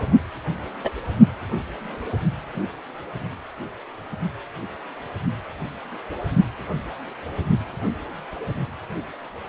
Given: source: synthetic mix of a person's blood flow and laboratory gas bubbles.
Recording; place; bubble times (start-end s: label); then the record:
Doppler ultrasound of blood flow; precordium
0.84-0.91 s: bubbles
From the record:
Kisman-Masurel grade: 112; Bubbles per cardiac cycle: 1 to 2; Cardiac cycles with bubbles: 1 to 10%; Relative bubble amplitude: moderate (0.250 to 0.450); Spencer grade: 1 (occasional bubble signal discernible with the cardiac motion signal, with majority of cardiac periods free of bubbles); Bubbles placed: only in the low amplitude regions of the cardiac cycle